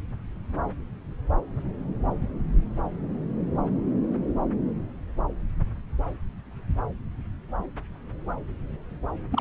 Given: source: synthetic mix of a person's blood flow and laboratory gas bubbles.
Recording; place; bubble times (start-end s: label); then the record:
Doppler ultrasound of blood flow; subclavian vein
9.31-9.41 s: bubbles
From the record:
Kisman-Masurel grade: 211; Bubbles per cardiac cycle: several, 3 to 8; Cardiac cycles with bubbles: 1 to 10%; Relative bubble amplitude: barely perceptible (0.100 to 0.250); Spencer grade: 1 (occasional bubble signal discernible with the cardiac motion signal, with majority of cardiac periods free of bubbles); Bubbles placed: anywhere in the cardiac cycle